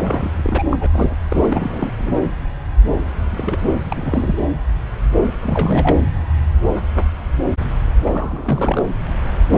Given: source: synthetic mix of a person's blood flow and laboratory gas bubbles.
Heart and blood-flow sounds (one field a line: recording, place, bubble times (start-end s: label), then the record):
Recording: Doppler ultrasound of blood flow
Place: subclavian vein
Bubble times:
0.00-0.31 s: bubbles
0.37-0.66 s: bubbles
0.70-1.16 s: bubbles
1.29-1.46 s: bubbles
1.48-1.96 s: bubbles
1.99-2.12 s: bubbles
3.30-3.59 s: bubbles
3.91-4.46 s: bubbles
5.40-5.97 s: bubbles
8.06-8.85 s: bubbles
9.51-9.58 s: bubbles
From the record:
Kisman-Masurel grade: 332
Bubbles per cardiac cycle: rolling drumbeat, 9 or more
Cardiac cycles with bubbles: 50 to 99%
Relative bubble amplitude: moderate (0.250 to 0.450)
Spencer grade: 3 (all of the cardiac periods contain showers or single bubble signals, but not dominating or overriding the cardiac motion signals)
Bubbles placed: anywhere in the cardiac cycle